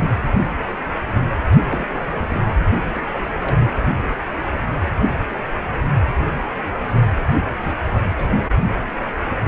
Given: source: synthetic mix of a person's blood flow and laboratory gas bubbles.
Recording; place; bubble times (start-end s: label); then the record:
Doppler ultrasound of blood flow; precordium
0.00-0.18 s: bubbles
1.69-1.99 s: bubbles
2.07-2.43 s: bubbles
2.95-3.06 s: bubbles
3.10-3.19 s: bubbles
3.42-3.73 s: bubbles
7.56-7.78 s: bubbles
8.16-8.41 s: bubbles
From the record:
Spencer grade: 2 (many but less than half of the cardiac periods contain bubble signals, singularly or in groups); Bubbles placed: only in the low amplitude regions of the cardiac cycle